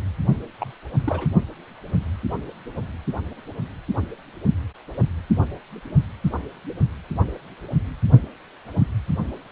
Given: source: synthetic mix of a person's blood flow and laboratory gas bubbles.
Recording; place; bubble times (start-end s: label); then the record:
Doppler ultrasound of blood flow; precordium
0.59-0.72 s: bubbles
0.98-1.28 s: bubbles
From the record:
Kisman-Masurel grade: 211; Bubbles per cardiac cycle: several, 3 to 8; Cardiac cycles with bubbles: 1 to 10%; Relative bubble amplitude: barely perceptible (0.100 to 0.250); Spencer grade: 1 (occasional bubble signal discernible with the cardiac motion signal, with majority of cardiac periods free of bubbles); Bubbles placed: only in the low amplitude regions of the cardiac cycle